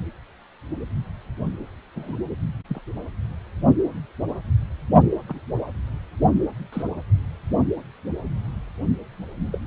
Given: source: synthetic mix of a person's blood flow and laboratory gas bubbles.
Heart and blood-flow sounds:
Doppler ultrasound of blood flow; precordium
1.94-2.15 s: bubbles
2.69-2.81 s: bubbles
5.28-5.40 s: bubbles
6.72-6.82 s: bubbles
9.53-9.59 s: bubbles
From the record:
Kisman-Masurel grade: 121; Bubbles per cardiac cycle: 1 to 2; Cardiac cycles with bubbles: 10 to 50%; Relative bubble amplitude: barely perceptible (0.100 to 0.250); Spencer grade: 2 (many but less than half of the cardiac periods contain bubble signals, singularly or in groups); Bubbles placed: anywhere in the cardiac cycle

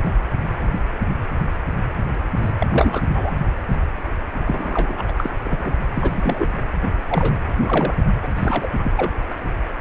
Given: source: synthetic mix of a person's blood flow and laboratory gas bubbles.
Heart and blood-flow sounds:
Doppler ultrasound of blood flow; precordium
0.00-0.12 s: bubbles
2.36-2.52 s: bubbles
2.60-2.67 s: bubbles
2.72-3.03 s: bubbles
3.13-3.32 s: bubbles
4.46-5.03 s: bubbles
5.08-5.12 s: bubbles
5.17-5.30 s: bubbles
5.44-5.72 s: bubbles
5.94-6.54 s: bubbles
7.08-7.36 s: bubbles
7.61-7.95 s: bubbles
8.22-8.28 s: bubbles
8.36-8.71 s: bubbles
8.79-8.92 s: bubbles
8.96-9.13 s: bubbles
From the record:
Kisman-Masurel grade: 332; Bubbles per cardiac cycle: rolling drumbeat, 9 or more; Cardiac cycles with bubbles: 50 to 99%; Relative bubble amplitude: moderate (0.250 to 0.450); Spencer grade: 3 (all of the cardiac periods contain showers or single bubble signals, but not dominating or overriding the cardiac motion signals); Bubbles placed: only in the low amplitude regions of the cardiac cycle

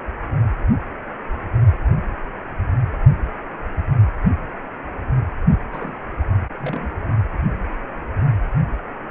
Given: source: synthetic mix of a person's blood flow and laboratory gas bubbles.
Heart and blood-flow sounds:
Doppler ultrasound of blood flow; precordium
5.72-5.96 s: bubbles
6.59-6.91 s: bubbles
From the record:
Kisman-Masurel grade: 211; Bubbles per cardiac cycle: several, 3 to 8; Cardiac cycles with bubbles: 1 to 10%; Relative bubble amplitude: barely perceptible (0.100 to 0.250); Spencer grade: 1 (occasional bubble signal discernible with the cardiac motion signal, with majority of cardiac periods free of bubbles); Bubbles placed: only in the low amplitude regions of the cardiac cycle

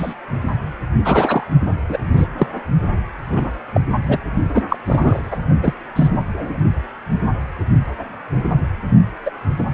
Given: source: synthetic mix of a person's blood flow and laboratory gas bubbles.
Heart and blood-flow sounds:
Doppler ultrasound of blood flow; precordium
0.00-0.14 s: bubbles
1.04-1.44 s: bubbles
1.89-1.98 s: bubbles
2.16-2.27 s: bubbles
2.38-2.47 s: bubbles
3.29-3.52 s: bubbles
3.74-3.81 s: bubbles
4.04-4.20 s: bubbles
4.54-4.64 s: bubbles
4.70-4.76 s: bubbles
4.84-5.21 s: bubbles
5.31-5.37 s: bubbles
5.62-5.73 s: bubbles
5.96-6.08 s: bubbles
6.33-6.58 s: bubbles
9.26-9.30 s: bubbles
9.58-9.66 s: bubbles
From the record:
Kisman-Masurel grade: 233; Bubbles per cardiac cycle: several, 3 to 8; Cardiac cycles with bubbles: 50 to 99%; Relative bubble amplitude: loud (0.450 to 0.775); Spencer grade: 3 (all of the cardiac periods contain showers or single bubble signals, but not dominating or overriding the cardiac motion signals); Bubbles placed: only in the low amplitude regions of the cardiac cycle

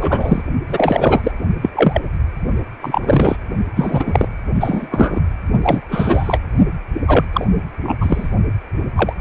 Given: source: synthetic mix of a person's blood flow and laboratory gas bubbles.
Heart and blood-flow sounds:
Doppler ultrasound of blood flow; precordium
0.00-0.42 s: bubbles
0.68-1.31 s: bubbles
1.61-1.70 s: bubbles
1.74-1.99 s: bubbles
2.81-3.36 s: bubbles
3.75-4.28 s: bubbles
4.60-4.88 s: bubbles
4.91-5.21 s: bubbles
5.62-5.80 s: bubbles
5.89-6.40 s: bubbles
7.07-7.25 s: bubbles
7.33-7.45 s: bubbles
7.82-7.96 s: bubbles
8.01-8.29 s: bubbles
8.96-9.13 s: bubbles
From the record:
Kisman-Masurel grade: 243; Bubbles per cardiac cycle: several, 3 to 8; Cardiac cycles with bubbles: 100%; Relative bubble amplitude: loud (0.450 to 0.775); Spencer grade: 3 (all of the cardiac periods contain showers or single bubble signals, but not dominating or overriding the cardiac motion signals); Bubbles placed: only in the low amplitude regions of the cardiac cycle

